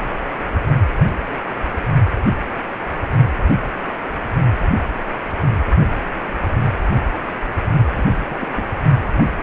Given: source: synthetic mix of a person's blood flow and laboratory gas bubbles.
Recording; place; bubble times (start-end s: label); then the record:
Doppler ultrasound of blood flow; precordium
7.94-8.04 s: bubbles
8.23-8.65 s: bubbles
9.17-9.33 s: bubbles
From the record:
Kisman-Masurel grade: 221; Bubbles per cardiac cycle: several, 3 to 8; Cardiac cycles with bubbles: 10 to 50%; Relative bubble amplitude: barely perceptible (0.100 to 0.250); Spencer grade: 2 (many but less than half of the cardiac periods contain bubble signals, singularly or in groups); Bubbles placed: only in the low amplitude regions of the cardiac cycle